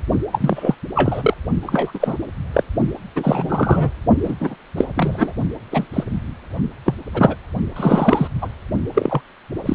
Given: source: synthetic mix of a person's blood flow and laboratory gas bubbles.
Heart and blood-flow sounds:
Doppler ultrasound of blood flow; precordium
0.32-0.74 s: bubbles
0.94-1.34 s: bubbles
1.62-1.92 s: bubbles
1.94-2.17 s: bubbles
2.54-2.64 s: bubbles
3.16-3.92 s: bubbles
4.23-4.34 s: bubbles
4.40-4.54 s: bubbles
4.77-4.84 s: bubbles
4.96-5.33 s: bubbles
5.71-5.86 s: bubbles
5.93-6.04 s: bubbles
6.85-6.94 s: bubbles
7.13-7.36 s: bubbles
7.76-8.28 s: bubbles
8.41-8.48 s: bubbles
8.94-9.21 s: bubbles
9.66-9.75 s: bubbles
From the record:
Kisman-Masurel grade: 243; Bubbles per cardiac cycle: several, 3 to 8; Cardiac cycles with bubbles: 100%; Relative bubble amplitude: loud (0.450 to 0.775); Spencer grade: 3 (all of the cardiac periods contain showers or single bubble signals, but not dominating or overriding the cardiac motion signals); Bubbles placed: only in the low amplitude regions of the cardiac cycle

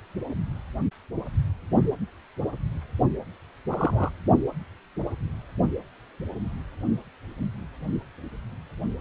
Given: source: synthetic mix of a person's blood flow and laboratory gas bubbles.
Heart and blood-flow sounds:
Doppler ultrasound of blood flow; precordium
3.70-4.10 s: bubbles
From the record:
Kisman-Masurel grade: 112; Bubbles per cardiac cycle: 1 to 2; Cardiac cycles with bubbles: 1 to 10%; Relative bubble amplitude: moderate (0.250 to 0.450); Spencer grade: 1 (occasional bubble signal discernible with the cardiac motion signal, with majority of cardiac periods free of bubbles); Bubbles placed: only in the low amplitude regions of the cardiac cycle

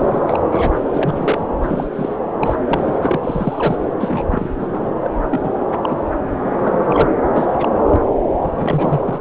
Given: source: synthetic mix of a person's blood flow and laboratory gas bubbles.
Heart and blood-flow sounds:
Doppler ultrasound of blood flow; subclavian vein
0.00-0.20 s: bubbles
0.28-0.73 s: bubbles
0.92-1.46 s: bubbles
1.62-1.89 s: bubbles
1.93-2.16 s: bubbles
2.41-2.56 s: bubbles
2.69-3.20 s: bubbles
3.23-3.77 s: bubbles
3.99-4.24 s: bubbles
4.30-4.48 s: bubbles
4.58-4.68 s: bubbles
4.73-4.79 s: bubbles
5.03-5.11 s: bubbles
5.29-5.40 s: bubbles
5.43-5.49 s: bubbles
5.58-5.67 s: bubbles
5.82-6.09 s: bubbles
6.63-7.10 s: bubbles
7.32-7.53 s: bubbles
7.58-7.69 s: bubbles
7.88-8.01 s: bubbles
8.51-9.01 s: bubbles
9.04-9.21 s: bubbles
From the record:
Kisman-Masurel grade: 242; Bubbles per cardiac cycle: several, 3 to 8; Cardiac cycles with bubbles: 100%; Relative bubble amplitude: moderate (0.250 to 0.450); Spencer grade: 3 (all of the cardiac periods contain showers or single bubble signals, but not dominating or overriding the cardiac motion signals); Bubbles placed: anywhere in the cardiac cycle

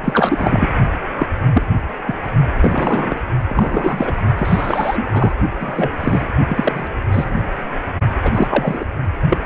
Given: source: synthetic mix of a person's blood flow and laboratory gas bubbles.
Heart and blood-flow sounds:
Doppler ultrasound of blood flow; precordium
0.04-0.69 s: bubbles
1.19-1.27 s: bubbles
1.53-1.62 s: bubbles
2.07-2.15 s: bubbles
2.54-3.20 s: bubbles
3.49-4.13 s: bubbles
4.38-5.34 s: bubbles
5.60-5.91 s: bubbles
6.00-6.27 s: bubbles
6.48-6.88 s: bubbles
7.08-7.54 s: bubbles
8.23-8.85 s: bubbles
9.29-9.38 s: bubbles
9.44-9.46 s: bubbles
From the record:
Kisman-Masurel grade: 243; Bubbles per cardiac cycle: several, 3 to 8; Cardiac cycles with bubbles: 100%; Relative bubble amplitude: loud (0.450 to 0.775); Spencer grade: 3 (all of the cardiac periods contain showers or single bubble signals, but not dominating or overriding the cardiac motion signals); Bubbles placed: only in the low amplitude regions of the cardiac cycle

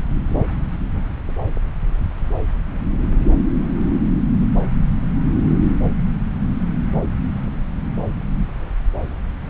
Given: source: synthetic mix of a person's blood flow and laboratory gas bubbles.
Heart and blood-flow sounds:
Doppler ultrasound of blood flow; subclavian vein
no bubbles
From the record:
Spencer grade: 0 (complete lack of bubble signals)

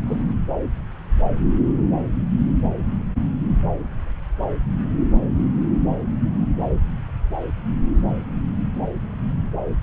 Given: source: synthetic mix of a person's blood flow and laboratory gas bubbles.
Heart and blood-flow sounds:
Doppler ultrasound of blood flow; subclavian vein
0.07-0.22 s: bubbles
From the record:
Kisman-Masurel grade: 111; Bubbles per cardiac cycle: 1 to 2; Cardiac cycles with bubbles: 1 to 10%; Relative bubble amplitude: barely perceptible (0.100 to 0.250); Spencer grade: 1 (occasional bubble signal discernible with the cardiac motion signal, with majority of cardiac periods free of bubbles); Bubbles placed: anywhere in the cardiac cycle

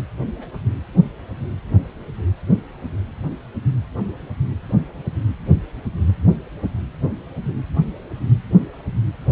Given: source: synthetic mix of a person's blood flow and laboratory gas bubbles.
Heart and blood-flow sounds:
Doppler ultrasound of blood flow; precordium
0.35-0.48 s: bubbles
From the record:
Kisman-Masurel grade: 111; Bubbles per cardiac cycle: 1 to 2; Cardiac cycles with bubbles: 1 to 10%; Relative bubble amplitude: barely perceptible (0.100 to 0.250); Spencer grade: 1 (occasional bubble signal discernible with the cardiac motion signal, with majority of cardiac periods free of bubbles); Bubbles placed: anywhere in the cardiac cycle

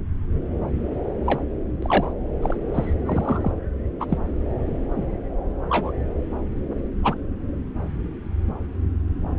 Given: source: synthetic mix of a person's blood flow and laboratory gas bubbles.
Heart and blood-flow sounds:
Doppler ultrasound of blood flow; subclavian vein
1.26-1.40 s: bubbles
1.82-2.12 s: bubbles
2.42-2.56 s: bubbles
2.74-2.93 s: bubbles
3.05-3.52 s: bubbles
4.00-4.05 s: bubbles
4.08-4.17 s: bubbles
4.96-5.05 s: bubbles
5.69-5.92 s: bubbles
7.03-7.14 s: bubbles
From the record:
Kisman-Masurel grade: 122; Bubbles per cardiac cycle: 1 to 2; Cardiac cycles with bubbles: 10 to 50%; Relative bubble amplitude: moderate (0.250 to 0.450); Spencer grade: 2 (many but less than half of the cardiac periods contain bubble signals, singularly or in groups); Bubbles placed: anywhere in the cardiac cycle

